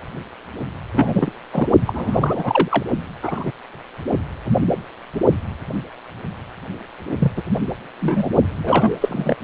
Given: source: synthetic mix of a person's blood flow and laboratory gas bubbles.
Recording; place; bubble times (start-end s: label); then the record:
Doppler ultrasound of blood flow; precordium
0.94-1.32 s: bubbles
1.53-1.68 s: bubbles
1.85-2.83 s: bubbles
3.21-3.52 s: bubbles
7.19-7.32 s: bubbles
7.37-7.42 s: bubbles
8.00-8.29 s: bubbles
8.63-8.96 s: bubbles
9.01-9.36 s: bubbles
From the record:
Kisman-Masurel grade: 233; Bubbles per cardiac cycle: several, 3 to 8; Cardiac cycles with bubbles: 50 to 99%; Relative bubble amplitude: loud (0.450 to 0.775); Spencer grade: 3 (all of the cardiac periods contain showers or single bubble signals, but not dominating or overriding the cardiac motion signals); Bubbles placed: only in the low amplitude regions of the cardiac cycle